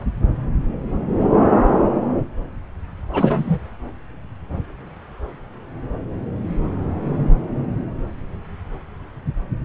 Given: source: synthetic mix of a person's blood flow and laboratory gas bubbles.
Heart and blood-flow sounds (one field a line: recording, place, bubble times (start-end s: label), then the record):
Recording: Doppler ultrasound of blood flow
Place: subclavian vein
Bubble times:
3.12-3.59 s: bubbles
From the record:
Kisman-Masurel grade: 213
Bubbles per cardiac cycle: several, 3 to 8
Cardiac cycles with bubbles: 1 to 10%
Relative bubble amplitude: loud (0.450 to 0.775)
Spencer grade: 1 (occasional bubble signal discernible with the cardiac motion signal, with majority of cardiac periods free of bubbles)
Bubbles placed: anywhere in the cardiac cycle